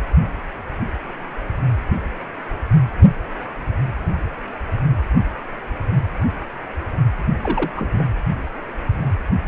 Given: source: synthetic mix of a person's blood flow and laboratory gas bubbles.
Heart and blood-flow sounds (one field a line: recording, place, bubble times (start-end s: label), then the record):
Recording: Doppler ultrasound of blood flow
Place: precordium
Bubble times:
7.43-7.71 s: bubbles
7.75-8.04 s: bubbles
From the record:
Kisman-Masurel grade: 212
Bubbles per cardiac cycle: several, 3 to 8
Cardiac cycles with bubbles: 1 to 10%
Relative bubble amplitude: moderate (0.250 to 0.450)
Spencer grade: 1 (occasional bubble signal discernible with the cardiac motion signal, with majority of cardiac periods free of bubbles)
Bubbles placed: anywhere in the cardiac cycle